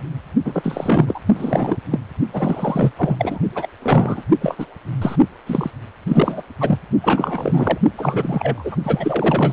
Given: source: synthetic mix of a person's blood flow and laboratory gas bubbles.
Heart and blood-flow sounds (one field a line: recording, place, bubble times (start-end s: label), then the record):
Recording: Doppler ultrasound of blood flow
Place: precordium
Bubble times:
0.45-1.20 s: bubbles
1.34-1.76 s: bubbles
1.91-2.00 s: bubbles
2.33-2.93 s: bubbles
2.98-3.39 s: bubbles
3.55-3.68 s: bubbles
3.82-4.23 s: bubbles
4.41-4.66 s: bubbles
5.02-5.16 s: bubbles
5.47-5.71 s: bubbles
6.08-6.42 s: bubbles
6.60-6.79 s: bubbles
7.02-7.78 s: bubbles
7.97-8.76 s: bubbles
8.84-9.53 s: bubbles
From the record:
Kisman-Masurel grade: 333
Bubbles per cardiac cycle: rolling drumbeat, 9 or more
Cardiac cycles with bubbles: 50 to 99%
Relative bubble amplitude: loud (0.450 to 0.775)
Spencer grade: 3 (all of the cardiac periods contain showers or single bubble signals, but not dominating or overriding the cardiac motion signals)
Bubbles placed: only in the low amplitude regions of the cardiac cycle